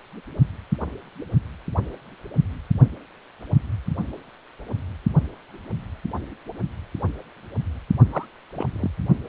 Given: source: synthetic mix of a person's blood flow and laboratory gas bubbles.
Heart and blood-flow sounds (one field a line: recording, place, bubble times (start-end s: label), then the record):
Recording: Doppler ultrasound of blood flow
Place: precordium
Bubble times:
8.12-8.25 s: bubbles
8.55-8.68 s: bubbles
8.74-8.89 s: bubbles
From the record:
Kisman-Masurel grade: 221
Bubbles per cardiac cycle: several, 3 to 8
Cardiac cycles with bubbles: 10 to 50%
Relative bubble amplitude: barely perceptible (0.100 to 0.250)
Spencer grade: 2 (many but less than half of the cardiac periods contain bubble signals, singularly or in groups)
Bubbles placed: only in the low amplitude regions of the cardiac cycle